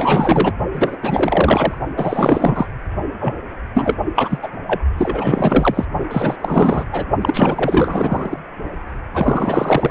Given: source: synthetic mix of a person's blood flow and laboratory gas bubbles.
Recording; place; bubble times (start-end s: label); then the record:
Doppler ultrasound of blood flow; precordium
0.00-0.53 s: bubbles
0.72-0.97 s: bubbles
1.01-1.78 s: bubbles
1.97-2.66 s: bubbles
3.20-3.34 s: bubbles
3.74-3.97 s: bubbles
4.15-4.38 s: bubbles
4.42-4.49 s: bubbles
4.67-4.81 s: bubbles
4.97-5.86 s: bubbles
6.11-6.36 s: bubbles
6.39-6.85 s: bubbles
6.92-7.06 s: bubbles
7.21-8.39 s: bubbles
9.13-9.91 s: bubbles
From the record:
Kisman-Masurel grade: 444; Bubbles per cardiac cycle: continuous sound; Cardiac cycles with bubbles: 100%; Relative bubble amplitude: maximal (0.775 to 0.999); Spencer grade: 4 (maximum detectable bubble signal sounding continuously throughout systole and diastole of every cardiac period, and overriding the amplitude of the normal cardiac signals); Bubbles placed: only in the low amplitude regions of the cardiac cycle